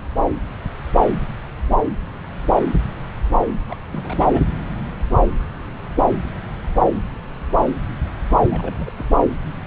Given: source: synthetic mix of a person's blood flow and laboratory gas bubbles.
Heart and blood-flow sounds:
Doppler ultrasound of blood flow; subclavian vein
3.68-3.77 s: bubbles
3.92-4.44 s: bubbles
8.50-8.92 s: bubbles
8.96-9.08 s: bubbles
From the record:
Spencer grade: 2 (many but less than half of the cardiac periods contain bubble signals, singularly or in groups); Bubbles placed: anywhere in the cardiac cycle

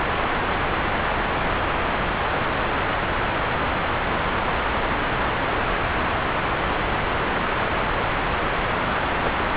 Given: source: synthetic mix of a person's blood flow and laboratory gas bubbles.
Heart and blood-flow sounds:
Doppler ultrasound of blood flow; subclavian vein
9.23-9.30 s: bubbles
From the record:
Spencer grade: 2 (many but less than half of the cardiac periods contain bubble signals, singularly or in groups); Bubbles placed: anywhere in the cardiac cycle

